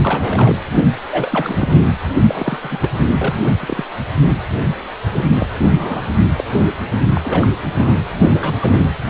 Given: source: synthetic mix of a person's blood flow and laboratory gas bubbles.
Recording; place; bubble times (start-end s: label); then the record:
Doppler ultrasound of blood flow; precordium
0.00-0.59 s: bubbles
0.73-0.79 s: bubbles
0.93-0.95 s: bubbles
1.12-1.69 s: bubbles
2.25-2.58 s: bubbles
2.62-2.90 s: bubbles
3.17-3.35 s: bubbles
3.45-3.52 s: bubbles
3.59-3.84 s: bubbles
5.12-5.26 s: bubbles
5.31-5.47 s: bubbles
5.75-6.01 s: bubbles
6.38-6.43 s: bubbles
6.49-6.71 s: bubbles
7.16-7.50 s: bubbles
7.74-8.01 s: bubbles
8.31-8.84 s: bubbles
From the record:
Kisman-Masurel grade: 242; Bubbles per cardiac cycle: several, 3 to 8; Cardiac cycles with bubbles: 100%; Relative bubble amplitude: moderate (0.250 to 0.450); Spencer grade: 3 (all of the cardiac periods contain showers or single bubble signals, but not dominating or overriding the cardiac motion signals); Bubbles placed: anywhere in the cardiac cycle